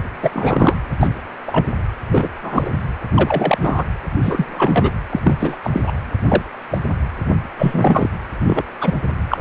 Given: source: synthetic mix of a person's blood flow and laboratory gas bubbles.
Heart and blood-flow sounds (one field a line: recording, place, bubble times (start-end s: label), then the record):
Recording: Doppler ultrasound of blood flow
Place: precordium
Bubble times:
0.22-0.76 s: bubbles
1.00-1.10 s: bubbles
1.48-1.66 s: bubbles
2.11-2.29 s: bubbles
2.42-2.70 s: bubbles
3.14-3.58 s: bubbles
3.61-3.85 s: bubbles
4.22-4.92 s: bubbles
5.10-5.21 s: bubbles
5.24-5.57 s: bubbles
5.64-5.70 s: bubbles
5.73-5.81 s: bubbles
5.87-5.93 s: bubbles
6.28-6.42 s: bubbles
6.70-6.78 s: bubbles
7.59-8.10 s: bubbles
8.46-8.62 s: bubbles
8.80-8.94 s: bubbles
9.29-9.38 s: bubbles
From the record:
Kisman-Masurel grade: 243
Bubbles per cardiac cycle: several, 3 to 8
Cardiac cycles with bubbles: 100%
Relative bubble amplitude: loud (0.450 to 0.775)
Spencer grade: 3 (all of the cardiac periods contain showers or single bubble signals, but not dominating or overriding the cardiac motion signals)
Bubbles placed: anywhere in the cardiac cycle